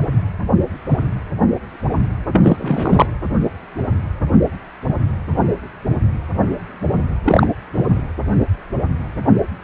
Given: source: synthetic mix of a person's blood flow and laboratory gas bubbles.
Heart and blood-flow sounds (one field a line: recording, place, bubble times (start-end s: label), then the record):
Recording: Doppler ultrasound of blood flow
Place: precordium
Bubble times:
2.33-3.07 s: bubbles
7.25-7.47 s: bubbles
7.73-8.03 s: bubbles
From the record:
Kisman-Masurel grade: 223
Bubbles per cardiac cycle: several, 3 to 8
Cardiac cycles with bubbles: 10 to 50%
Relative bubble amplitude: loud (0.450 to 0.775)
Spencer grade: 2 (many but less than half of the cardiac periods contain bubble signals, singularly or in groups)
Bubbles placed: anywhere in the cardiac cycle